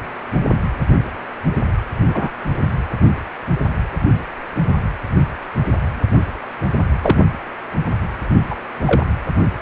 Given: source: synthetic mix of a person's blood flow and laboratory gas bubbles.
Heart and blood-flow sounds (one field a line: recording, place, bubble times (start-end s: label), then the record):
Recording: Doppler ultrasound of blood flow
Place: precordium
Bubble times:
2.07-2.30 s: bubbles
7.03-7.18 s: bubbles
8.49-8.54 s: bubbles
8.85-9.06 s: bubbles
From the record:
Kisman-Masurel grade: 123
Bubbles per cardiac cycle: 1 to 2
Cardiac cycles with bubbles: 10 to 50%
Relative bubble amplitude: loud (0.450 to 0.775)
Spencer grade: 2 (many but less than half of the cardiac periods contain bubble signals, singularly or in groups)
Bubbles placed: anywhere in the cardiac cycle